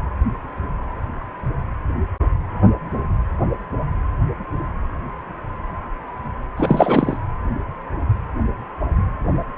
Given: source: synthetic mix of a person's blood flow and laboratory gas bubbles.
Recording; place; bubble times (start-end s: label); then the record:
Doppler ultrasound of blood flow; precordium
6.56-7.17 s: bubbles
From the record:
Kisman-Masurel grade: 213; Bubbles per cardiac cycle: several, 3 to 8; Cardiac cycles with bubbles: 1 to 10%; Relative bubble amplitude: loud (0.450 to 0.775); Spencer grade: 1 (occasional bubble signal discernible with the cardiac motion signal, with majority of cardiac periods free of bubbles); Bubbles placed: anywhere in the cardiac cycle